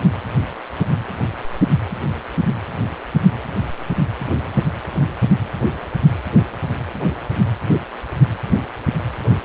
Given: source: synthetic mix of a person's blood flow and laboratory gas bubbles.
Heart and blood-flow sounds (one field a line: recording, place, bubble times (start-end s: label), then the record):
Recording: Doppler ultrasound of blood flow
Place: precordium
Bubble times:
no bubbles
From the record:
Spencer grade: 0 (complete lack of bubble signals)